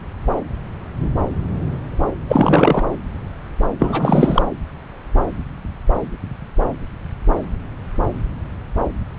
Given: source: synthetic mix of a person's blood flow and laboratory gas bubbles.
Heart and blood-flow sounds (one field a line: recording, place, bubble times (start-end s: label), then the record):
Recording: Doppler ultrasound of blood flow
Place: subclavian vein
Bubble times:
2.28-2.85 s: bubbles
3.79-4.42 s: bubbles
From the record:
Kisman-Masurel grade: 223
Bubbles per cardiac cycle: several, 3 to 8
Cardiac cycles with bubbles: 10 to 50%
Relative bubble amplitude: loud (0.450 to 0.775)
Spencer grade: 2 (many but less than half of the cardiac periods contain bubble signals, singularly or in groups)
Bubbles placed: anywhere in the cardiac cycle